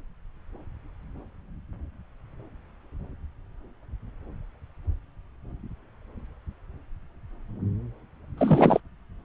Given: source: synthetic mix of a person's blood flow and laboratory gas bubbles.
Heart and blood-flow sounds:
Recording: Doppler ultrasound of blood flow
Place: subclavian vein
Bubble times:
8.38-8.80 s: bubbles
From the record:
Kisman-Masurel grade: 212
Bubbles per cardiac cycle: several, 3 to 8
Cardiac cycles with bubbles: 1 to 10%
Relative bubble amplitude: moderate (0.250 to 0.450)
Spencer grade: 1 (occasional bubble signal discernible with the cardiac motion signal, with majority of cardiac periods free of bubbles)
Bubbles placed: anywhere in the cardiac cycle

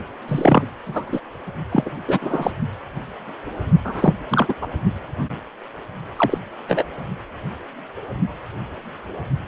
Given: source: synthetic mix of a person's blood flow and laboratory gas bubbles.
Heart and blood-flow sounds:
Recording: Doppler ultrasound of blood flow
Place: precordium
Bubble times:
0.28-0.67 s: bubbles
0.86-1.21 s: bubbles
1.71-1.91 s: bubbles
2.08-2.19 s: bubbles
2.21-2.52 s: bubbles
3.84-4.14 s: bubbles
4.30-4.54 s: bubbles
4.61-4.67 s: bubbles
6.17-6.38 s: bubbles
6.68-6.83 s: bubbles
From the record:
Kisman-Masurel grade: 223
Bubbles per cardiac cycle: several, 3 to 8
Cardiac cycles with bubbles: 10 to 50%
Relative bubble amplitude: loud (0.450 to 0.775)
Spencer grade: 2 (many but less than half of the cardiac periods contain bubble signals, singularly or in groups)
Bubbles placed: only in the low amplitude regions of the cardiac cycle

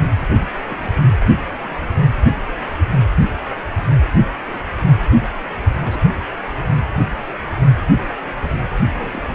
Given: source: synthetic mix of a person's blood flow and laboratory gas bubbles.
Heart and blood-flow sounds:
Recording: Doppler ultrasound of blood flow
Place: precordium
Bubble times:
0.33-0.44 s: bubbles
0.67-0.90 s: bubbles
1.20-1.25 s: bubbles
1.59-1.76 s: bubbles
5.70-6.04 s: bubbles
8.94-9.35 s: bubbles
From the record:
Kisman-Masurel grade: 121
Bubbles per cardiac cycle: 1 to 2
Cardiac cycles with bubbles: 10 to 50%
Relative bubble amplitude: barely perceptible (0.100 to 0.250)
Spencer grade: 2 (many but less than half of the cardiac periods contain bubble signals, singularly or in groups)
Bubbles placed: anywhere in the cardiac cycle

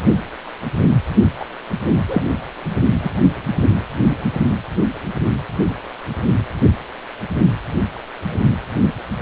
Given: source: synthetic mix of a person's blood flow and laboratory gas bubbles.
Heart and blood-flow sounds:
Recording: Doppler ultrasound of blood flow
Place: precordium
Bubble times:
1.40-1.45 s: bubbles
2.08-2.28 s: bubbles
3.03-3.10 s: bubbles
From the record:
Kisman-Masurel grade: 213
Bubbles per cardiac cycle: several, 3 to 8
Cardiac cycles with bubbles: 1 to 10%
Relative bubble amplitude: loud (0.450 to 0.775)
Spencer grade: 1 (occasional bubble signal discernible with the cardiac motion signal, with majority of cardiac periods free of bubbles)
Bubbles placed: only in the low amplitude regions of the cardiac cycle

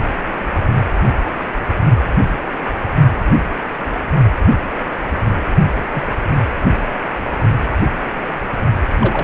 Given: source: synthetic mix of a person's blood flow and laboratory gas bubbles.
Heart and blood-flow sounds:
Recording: Doppler ultrasound of blood flow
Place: precordium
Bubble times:
5.94-6.06 s: bubbles
9.00-9.24 s: bubbles
From the record:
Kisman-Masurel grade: 122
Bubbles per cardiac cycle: 1 to 2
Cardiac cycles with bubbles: 10 to 50%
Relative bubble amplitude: moderate (0.250 to 0.450)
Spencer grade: 2 (many but less than half of the cardiac periods contain bubble signals, singularly or in groups)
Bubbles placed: only in the low amplitude regions of the cardiac cycle

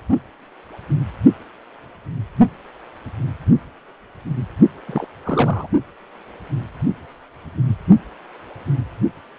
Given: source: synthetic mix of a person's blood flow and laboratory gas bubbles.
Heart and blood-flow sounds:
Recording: Doppler ultrasound of blood flow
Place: precordium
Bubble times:
4.87-5.08 s: bubbles
5.25-5.68 s: bubbles
From the record:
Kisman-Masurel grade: 211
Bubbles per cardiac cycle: several, 3 to 8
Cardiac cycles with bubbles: 1 to 10%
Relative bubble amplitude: barely perceptible (0.100 to 0.250)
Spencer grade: 1 (occasional bubble signal discernible with the cardiac motion signal, with majority of cardiac periods free of bubbles)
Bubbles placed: only in the low amplitude regions of the cardiac cycle

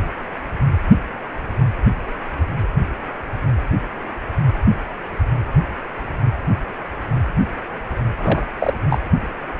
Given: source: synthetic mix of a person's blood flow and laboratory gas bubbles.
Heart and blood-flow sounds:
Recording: Doppler ultrasound of blood flow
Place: precordium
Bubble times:
8.18-8.48 s: bubbles
8.60-8.73 s: bubbles
8.88-8.98 s: bubbles
From the record:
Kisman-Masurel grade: 213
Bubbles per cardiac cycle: several, 3 to 8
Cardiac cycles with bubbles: 1 to 10%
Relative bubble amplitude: loud (0.450 to 0.775)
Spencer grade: 1 (occasional bubble signal discernible with the cardiac motion signal, with majority of cardiac periods free of bubbles)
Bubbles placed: anywhere in the cardiac cycle

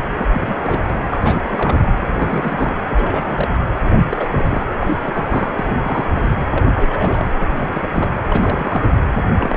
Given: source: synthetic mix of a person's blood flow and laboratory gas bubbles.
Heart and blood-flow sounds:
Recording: Doppler ultrasound of blood flow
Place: precordium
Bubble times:
0.00-0.04 s: bubbles
0.17-0.30 s: bubbles
0.33-1.06 s: bubbles
1.11-1.79 s: bubbles
1.99-2.78 s: bubbles
2.90-3.60 s: bubbles
3.82-3.99 s: bubbles
4.09-4.29 s: bubbles
4.32-4.63 s: bubbles
4.79-4.98 s: bubbles
5.02-5.53 s: bubbles
5.58-6.05 s: bubbles
6.15-6.32 s: bubbles
6.50-6.65 s: bubbles
6.74-7.88 s: bubbles
7.93-8.12 s: bubbles
8.29-8.92 s: bubbles
9.36-9.57 s: bubbles
From the record:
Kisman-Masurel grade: 342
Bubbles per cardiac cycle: rolling drumbeat, 9 or more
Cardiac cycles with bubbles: 100%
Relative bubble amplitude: moderate (0.250 to 0.450)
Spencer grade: 3 (all of the cardiac periods contain showers or single bubble signals, but not dominating or overriding the cardiac motion signals)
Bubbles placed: anywhere in the cardiac cycle

